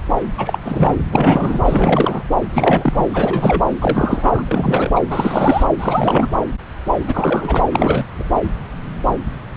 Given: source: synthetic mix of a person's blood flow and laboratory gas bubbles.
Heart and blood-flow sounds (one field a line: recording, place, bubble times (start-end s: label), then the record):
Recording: Doppler ultrasound of blood flow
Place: subclavian vein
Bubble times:
0.38-0.58 s: bubbles
0.65-0.95 s: bubbles
1.11-1.61 s: bubbles
1.64-2.22 s: bubbles
2.53-3.08 s: bubbles
3.13-3.64 s: bubbles
3.80-4.42 s: bubbles
4.46-4.91 s: bubbles
4.96-5.00 s: bubbles
5.09-5.68 s: bubbles
5.78-6.29 s: bubbles
7.06-7.62 s: bubbles
7.71-8.06 s: bubbles
8.19-8.24 s: bubbles
From the record:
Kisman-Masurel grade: 333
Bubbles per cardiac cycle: rolling drumbeat, 9 or more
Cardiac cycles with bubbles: 50 to 99%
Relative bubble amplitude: loud (0.450 to 0.775)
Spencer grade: 3 (all of the cardiac periods contain showers or single bubble signals, but not dominating or overriding the cardiac motion signals)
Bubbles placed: anywhere in the cardiac cycle